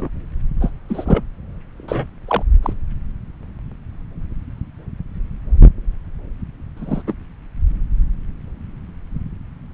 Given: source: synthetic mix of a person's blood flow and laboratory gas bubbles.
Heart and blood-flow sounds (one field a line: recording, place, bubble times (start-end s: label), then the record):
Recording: Doppler ultrasound of blood flow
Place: subclavian vein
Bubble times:
0.00-0.08 s: bubbles
0.60-0.71 s: bubbles
0.89-1.23 s: bubbles
1.77-2.08 s: bubbles
2.28-2.43 s: bubbles
2.62-2.73 s: bubbles
6.76-7.02 s: bubbles
7.06-7.13 s: bubbles
From the record:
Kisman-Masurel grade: 222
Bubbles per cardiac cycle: several, 3 to 8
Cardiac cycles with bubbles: 10 to 50%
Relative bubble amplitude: moderate (0.250 to 0.450)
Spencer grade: 2 (many but less than half of the cardiac periods contain bubble signals, singularly or in groups)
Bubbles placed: anywhere in the cardiac cycle